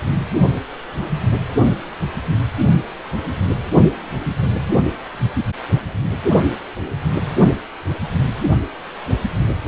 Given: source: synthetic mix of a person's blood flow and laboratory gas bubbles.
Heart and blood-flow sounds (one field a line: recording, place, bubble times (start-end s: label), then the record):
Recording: Doppler ultrasound of blood flow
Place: precordium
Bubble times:
no bubbles
From the record:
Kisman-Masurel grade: 000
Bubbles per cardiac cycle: 0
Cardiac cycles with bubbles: 0%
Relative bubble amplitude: no bubbles discernible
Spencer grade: 0 (complete lack of bubble signals)